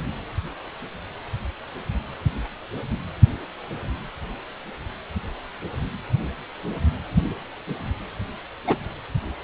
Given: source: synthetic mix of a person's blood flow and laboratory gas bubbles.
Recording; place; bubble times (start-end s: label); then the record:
Doppler ultrasound of blood flow; precordium
8.67-8.77 s: bubbles
From the record:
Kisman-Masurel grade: 112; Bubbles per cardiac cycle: 1 to 2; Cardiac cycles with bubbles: 1 to 10%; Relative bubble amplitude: moderate (0.250 to 0.450); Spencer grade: 1 (occasional bubble signal discernible with the cardiac motion signal, with majority of cardiac periods free of bubbles); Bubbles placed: anywhere in the cardiac cycle